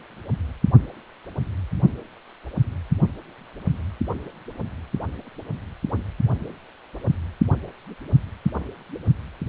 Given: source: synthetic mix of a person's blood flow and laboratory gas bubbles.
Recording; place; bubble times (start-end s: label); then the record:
Doppler ultrasound of blood flow; precordium
no bubbles
From the record:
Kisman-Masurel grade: 000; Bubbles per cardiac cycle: 0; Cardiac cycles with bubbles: 0%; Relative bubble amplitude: no bubbles discernible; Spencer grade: 0 (complete lack of bubble signals)